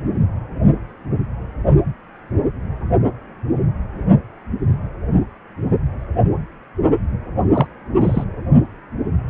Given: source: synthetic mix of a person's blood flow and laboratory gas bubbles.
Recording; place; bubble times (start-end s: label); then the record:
Doppler ultrasound of blood flow; precordium
7.53-7.67 s: bubbles
8.01-8.24 s: bubbles
From the record:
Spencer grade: 2 (many but less than half of the cardiac periods contain bubble signals, singularly or in groups); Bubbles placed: anywhere in the cardiac cycle